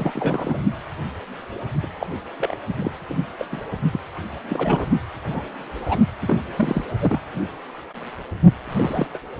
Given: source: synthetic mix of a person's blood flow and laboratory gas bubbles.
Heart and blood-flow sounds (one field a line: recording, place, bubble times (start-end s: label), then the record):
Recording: Doppler ultrasound of blood flow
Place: precordium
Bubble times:
0.00-0.62 s: bubbles
1.83-1.88 s: bubbles
2.00-2.07 s: bubbles
2.37-2.55 s: bubbles
2.75-2.91 s: bubbles
3.08-3.27 s: bubbles
3.38-3.46 s: bubbles
3.52-3.60 s: bubbles
3.92-4.00 s: bubbles
4.48-4.87 s: bubbles
5.29-5.42 s: bubbles
5.79-6.00 s: bubbles
6.21-6.37 s: bubbles
6.56-6.84 s: bubbles
7.01-7.20 s: bubbles
8.70-9.07 s: bubbles
9.14-9.18 s: bubbles
From the record:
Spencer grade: 3 (all of the cardiac periods contain showers or single bubble signals, but not dominating or overriding the cardiac motion signals)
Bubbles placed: only in the low amplitude regions of the cardiac cycle